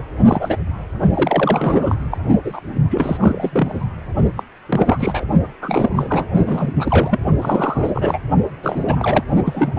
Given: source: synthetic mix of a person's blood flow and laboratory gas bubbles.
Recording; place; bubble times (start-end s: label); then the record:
Doppler ultrasound of blood flow; precordium
0.00-0.02 s: bubbles
0.18-0.23 s: bubbles
0.26-0.56 s: bubbles
1.14-1.96 s: bubbles
2.11-2.18 s: bubbles
2.44-2.61 s: bubbles
2.90-3.85 s: bubbles
4.36-4.43 s: bubbles
4.68-5.24 s: bubbles
5.61-6.26 s: bubbles
6.45-6.72 s: bubbles
6.74-7.19 s: bubbles
7.41-8.19 s: bubbles
8.62-9.24 s: bubbles
9.45-9.79 s: bubbles
From the record:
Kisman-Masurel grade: 342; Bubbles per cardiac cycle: rolling drumbeat, 9 or more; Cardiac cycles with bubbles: 100%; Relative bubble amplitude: moderate (0.250 to 0.450); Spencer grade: 3 (all of the cardiac periods contain showers or single bubble signals, but not dominating or overriding the cardiac motion signals); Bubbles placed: only in the low amplitude regions of the cardiac cycle